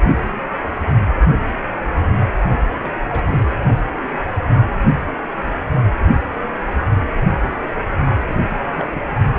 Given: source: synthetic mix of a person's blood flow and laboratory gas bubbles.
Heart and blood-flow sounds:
Doppler ultrasound of blood flow; precordium
2.84-3.01 s: bubbles
3.05-3.56 s: bubbles
8.27-8.39 s: bubbles
8.49-9.19 s: bubbles
From the record:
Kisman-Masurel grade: 221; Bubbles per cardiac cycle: several, 3 to 8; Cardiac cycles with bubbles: 10 to 50%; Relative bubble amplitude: barely perceptible (0.100 to 0.250); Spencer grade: 2 (many but less than half of the cardiac periods contain bubble signals, singularly or in groups); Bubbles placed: only in the low amplitude regions of the cardiac cycle

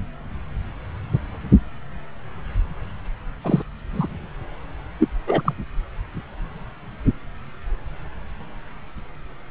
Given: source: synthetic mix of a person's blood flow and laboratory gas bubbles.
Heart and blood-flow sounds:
Doppler ultrasound of blood flow; subclavian vein
3.44-3.62 s: bubbles
3.93-4.08 s: bubbles
4.99-5.07 s: bubbles
5.27-5.42 s: bubbles
5.45-5.54 s: bubbles
From the record:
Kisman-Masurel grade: 123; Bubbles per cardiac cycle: 1 to 2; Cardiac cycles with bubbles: 10 to 50%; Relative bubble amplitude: loud (0.450 to 0.775); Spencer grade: 2 (many but less than half of the cardiac periods contain bubble signals, singularly or in groups); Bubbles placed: anywhere in the cardiac cycle

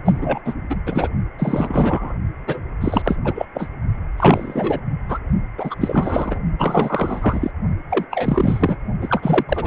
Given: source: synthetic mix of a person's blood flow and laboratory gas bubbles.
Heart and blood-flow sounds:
Doppler ultrasound of blood flow; precordium
0.04-0.40 s: bubbles
0.45-0.54 s: bubbles
0.69-0.76 s: bubbles
0.86-1.08 s: bubbles
1.39-2.15 s: bubbles
2.47-2.60 s: bubbles
2.81-3.18 s: bubbles
3.24-3.46 s: bubbles
3.54-3.69 s: bubbles
4.17-4.81 s: bubbles
5.08-5.19 s: bubbles
5.58-6.40 s: bubbles
6.58-7.51 s: bubbles
7.90-8.05 s: bubbles
8.10-8.76 s: bubbles
9.01-9.44 s: bubbles
9.48-9.67 s: bubbles
From the record:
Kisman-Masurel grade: 343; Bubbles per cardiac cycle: rolling drumbeat, 9 or more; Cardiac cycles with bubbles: 100%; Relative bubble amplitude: loud (0.450 to 0.775); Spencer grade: 3 (all of the cardiac periods contain showers or single bubble signals, but not dominating or overriding the cardiac motion signals); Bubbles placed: only in the low amplitude regions of the cardiac cycle

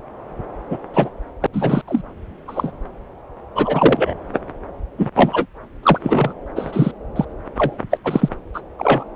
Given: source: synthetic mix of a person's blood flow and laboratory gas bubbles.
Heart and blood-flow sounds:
Doppler ultrasound of blood flow; subclavian vein
0.70-0.79 s: bubbles
0.94-1.09 s: bubbles
1.41-1.47 s: bubbles
1.53-1.82 s: bubbles
1.88-2.01 s: bubbles
2.47-2.71 s: bubbles
3.55-4.14 s: bubbles
4.98-5.08 s: bubbles
5.15-5.46 s: bubbles
5.83-6.33 s: bubbles
6.56-6.92 s: bubbles
7.16-7.25 s: bubbles
7.57-7.78 s: bubbles
7.91-7.99 s: bubbles
8.04-8.29 s: bubbles
8.54-8.61 s: bubbles
8.79-9.04 s: bubbles
From the record:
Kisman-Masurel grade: 233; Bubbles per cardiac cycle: several, 3 to 8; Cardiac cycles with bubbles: 50 to 99%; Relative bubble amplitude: loud (0.450 to 0.775); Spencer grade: 3 (all of the cardiac periods contain showers or single bubble signals, but not dominating or overriding the cardiac motion signals); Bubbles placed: anywhere in the cardiac cycle

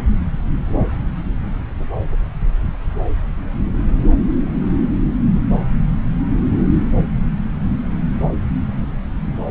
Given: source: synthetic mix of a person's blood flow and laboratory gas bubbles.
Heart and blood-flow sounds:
Doppler ultrasound of blood flow; subclavian vein
no bubbles
From the record:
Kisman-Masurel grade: 000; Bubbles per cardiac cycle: 0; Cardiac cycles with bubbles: 0%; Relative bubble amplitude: no bubbles discernible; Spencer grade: 0 (complete lack of bubble signals)

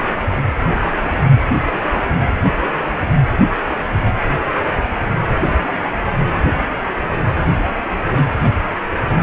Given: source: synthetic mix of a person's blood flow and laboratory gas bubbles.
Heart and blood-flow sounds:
Doppler ultrasound of blood flow; precordium
no bubbles
From the record:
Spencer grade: 0 (complete lack of bubble signals)

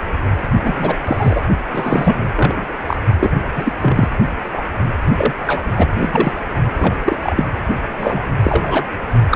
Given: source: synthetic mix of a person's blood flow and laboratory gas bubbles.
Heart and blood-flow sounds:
Doppler ultrasound of blood flow; precordium
0.64-0.97 s: bubbles
1.05-1.40 s: bubbles
1.72-2.17 s: bubbles
2.36-2.73 s: bubbles
2.87-2.97 s: bubbles
3.19-3.30 s: bubbles
3.56-3.73 s: bubbles
3.82-4.08 s: bubbles
4.53-4.62 s: bubbles
5.10-5.33 s: bubbles
5.46-5.62 s: bubbles
5.77-5.88 s: bubbles
6.00-6.32 s: bubbles
6.77-6.95 s: bubbles
7.04-7.17 s: bubbles
7.20-7.44 s: bubbles
7.98-8.25 s: bubbles
8.43-8.85 s: bubbles
9.30-9.36 s: bubbles
From the record:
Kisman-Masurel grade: 243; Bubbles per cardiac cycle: several, 3 to 8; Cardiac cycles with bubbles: 100%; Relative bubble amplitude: loud (0.450 to 0.775); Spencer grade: 3 (all of the cardiac periods contain showers or single bubble signals, but not dominating or overriding the cardiac motion signals); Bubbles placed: only in the low amplitude regions of the cardiac cycle

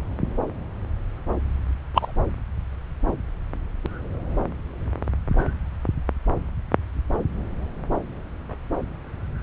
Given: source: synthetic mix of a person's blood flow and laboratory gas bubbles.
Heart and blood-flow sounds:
Doppler ultrasound of blood flow; subclavian vein
1.93-2.12 s: bubbles
From the record:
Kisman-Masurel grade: 123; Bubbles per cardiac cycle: 1 to 2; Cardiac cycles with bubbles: 10 to 50%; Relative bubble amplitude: loud (0.450 to 0.775); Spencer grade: 2 (many but less than half of the cardiac periods contain bubble signals, singularly or in groups); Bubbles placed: anywhere in the cardiac cycle

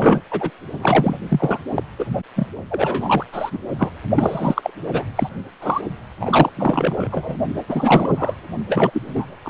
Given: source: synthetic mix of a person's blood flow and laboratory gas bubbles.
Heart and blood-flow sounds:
Doppler ultrasound of blood flow; precordium
0.00-0.21 s: bubbles
0.30-0.50 s: bubbles
0.79-1.19 s: bubbles
1.29-1.60 s: bubbles
1.75-1.83 s: bubbles
1.98-2.06 s: bubbles
2.35-2.47 s: bubbles
2.70-3.25 s: bubbles
3.32-3.60 s: bubbles
3.78-3.92 s: bubbles
4.15-4.71 s: bubbles
4.92-5.04 s: bubbles
5.15-5.29 s: bubbles
5.62-5.81 s: bubbles
6.19-6.50 s: bubbles
6.56-7.37 s: bubbles
7.69-8.36 s: bubbles
8.69-9.37 s: bubbles
9.42-9.49 s: bubbles
From the record:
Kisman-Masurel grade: 343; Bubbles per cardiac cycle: rolling drumbeat, 9 or more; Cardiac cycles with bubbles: 100%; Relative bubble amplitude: loud (0.450 to 0.775); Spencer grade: 3 (all of the cardiac periods contain showers or single bubble signals, but not dominating or overriding the cardiac motion signals); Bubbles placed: only in the low amplitude regions of the cardiac cycle

